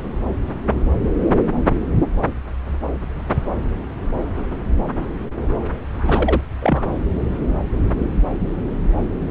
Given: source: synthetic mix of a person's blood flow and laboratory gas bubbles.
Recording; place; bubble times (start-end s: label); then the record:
Doppler ultrasound of blood flow; subclavian vein
5.92-6.41 s: bubbles
6.60-6.83 s: bubbles
From the record:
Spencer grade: 1 (occasional bubble signal discernible with the cardiac motion signal, with majority of cardiac periods free of bubbles); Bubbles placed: anywhere in the cardiac cycle